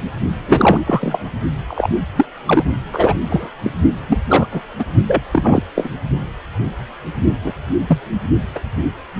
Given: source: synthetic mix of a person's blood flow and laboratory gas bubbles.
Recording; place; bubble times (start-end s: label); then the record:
Doppler ultrasound of blood flow; precordium
0.48-0.81 s: bubbles
0.86-1.19 s: bubbles
1.68-1.88 s: bubbles
2.16-2.26 s: bubbles
2.46-2.64 s: bubbles
2.92-3.14 s: bubbles
3.29-3.48 s: bubbles
3.63-3.71 s: bubbles
4.08-4.20 s: bubbles
4.28-4.47 s: bubbles
4.51-4.62 s: bubbles
4.78-4.85 s: bubbles
5.06-5.22 s: bubbles
5.32-5.62 s: bubbles
5.75-5.89 s: bubbles
7.43-7.53 s: bubbles
7.87-7.99 s: bubbles
8.55-8.60 s: bubbles
From the record:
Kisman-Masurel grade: 233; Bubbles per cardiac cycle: several, 3 to 8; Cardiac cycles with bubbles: 50 to 99%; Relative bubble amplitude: loud (0.450 to 0.775); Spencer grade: 3 (all of the cardiac periods contain showers or single bubble signals, but not dominating or overriding the cardiac motion signals); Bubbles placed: only in the low amplitude regions of the cardiac cycle